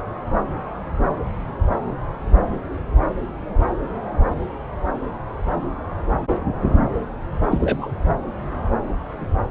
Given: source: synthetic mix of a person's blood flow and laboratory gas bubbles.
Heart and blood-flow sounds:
Doppler ultrasound of blood flow; subclavian vein
7.50-7.91 s: bubbles
From the record:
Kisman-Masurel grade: 112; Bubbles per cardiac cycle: 1 to 2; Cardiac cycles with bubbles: 1 to 10%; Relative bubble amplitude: moderate (0.250 to 0.450); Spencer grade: 1 (occasional bubble signal discernible with the cardiac motion signal, with majority of cardiac periods free of bubbles); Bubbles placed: anywhere in the cardiac cycle

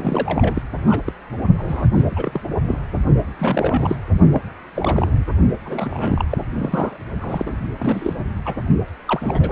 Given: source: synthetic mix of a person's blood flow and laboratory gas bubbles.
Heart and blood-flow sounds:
Doppler ultrasound of blood flow; precordium
0.00-0.62 s: bubbles
0.86-1.00 s: bubbles
1.06-1.12 s: bubbles
1.57-1.88 s: bubbles
1.93-2.41 s: bubbles
2.67-2.79 s: bubbles
3.39-3.95 s: bubbles
4.32-4.41 s: bubbles
4.74-5.32 s: bubbles
5.65-6.24 s: bubbles
6.29-6.38 s: bubbles
6.59-6.98 s: bubbles
7.20-7.68 s: bubbles
7.78-8.13 s: bubbles
8.45-8.54 s: bubbles
9.08-9.52 s: bubbles
From the record:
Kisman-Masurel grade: 342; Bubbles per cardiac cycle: rolling drumbeat, 9 or more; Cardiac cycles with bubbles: 100%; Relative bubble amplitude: moderate (0.250 to 0.450); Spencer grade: 3 (all of the cardiac periods contain showers or single bubble signals, but not dominating or overriding the cardiac motion signals); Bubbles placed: only in the low amplitude regions of the cardiac cycle

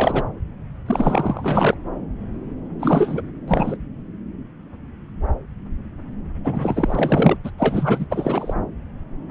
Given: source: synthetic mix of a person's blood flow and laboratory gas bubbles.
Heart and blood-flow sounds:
Doppler ultrasound of blood flow; subclavian vein
0.00-0.24 s: bubbles
0.86-1.77 s: bubbles
2.79-3.21 s: bubbles
3.48-3.77 s: bubbles
6.44-7.37 s: bubbles
7.43-7.51 s: bubbles
7.57-8.06 s: bubbles
8.10-8.54 s: bubbles
From the record:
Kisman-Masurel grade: 333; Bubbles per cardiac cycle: rolling drumbeat, 9 or more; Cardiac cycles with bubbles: 50 to 99%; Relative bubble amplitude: loud (0.450 to 0.775); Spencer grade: 3 (all of the cardiac periods contain showers or single bubble signals, but not dominating or overriding the cardiac motion signals); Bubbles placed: anywhere in the cardiac cycle

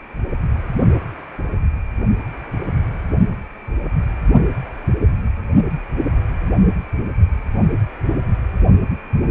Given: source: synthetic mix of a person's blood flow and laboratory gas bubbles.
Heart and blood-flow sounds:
Doppler ultrasound of blood flow; precordium
no bubbles
From the record:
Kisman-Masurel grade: 000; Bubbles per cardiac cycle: 0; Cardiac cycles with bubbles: 0%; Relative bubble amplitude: no bubbles discernible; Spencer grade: 0 (complete lack of bubble signals)

